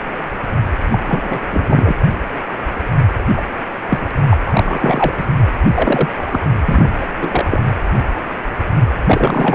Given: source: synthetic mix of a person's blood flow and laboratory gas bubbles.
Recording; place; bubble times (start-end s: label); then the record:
Doppler ultrasound of blood flow; precordium
0.92-0.98 s: bubbles
1.07-1.40 s: bubbles
1.51-1.94 s: bubbles
3.35-3.42 s: bubbles
3.90-4.07 s: bubbles
4.29-4.38 s: bubbles
4.46-5.25 s: bubbles
5.75-6.08 s: bubbles
6.21-6.40 s: bubbles
6.66-6.90 s: bubbles
7.00-7.07 s: bubbles
7.21-7.45 s: bubbles
7.51-7.62 s: bubbles
9.06-9.55 s: bubbles
From the record:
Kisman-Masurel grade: 233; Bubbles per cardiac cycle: several, 3 to 8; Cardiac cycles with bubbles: 50 to 99%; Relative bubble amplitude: loud (0.450 to 0.775); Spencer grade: 3 (all of the cardiac periods contain showers or single bubble signals, but not dominating or overriding the cardiac motion signals); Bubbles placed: anywhere in the cardiac cycle